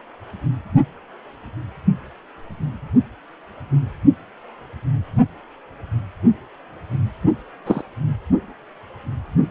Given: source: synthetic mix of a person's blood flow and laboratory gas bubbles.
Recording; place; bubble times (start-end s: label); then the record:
Doppler ultrasound of blood flow; precordium
7.66-7.81 s: bubbles
From the record:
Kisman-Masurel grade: 113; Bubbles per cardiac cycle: 1 to 2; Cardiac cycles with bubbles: 1 to 10%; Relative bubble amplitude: loud (0.450 to 0.775); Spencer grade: 1 (occasional bubble signal discernible with the cardiac motion signal, with majority of cardiac periods free of bubbles); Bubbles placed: anywhere in the cardiac cycle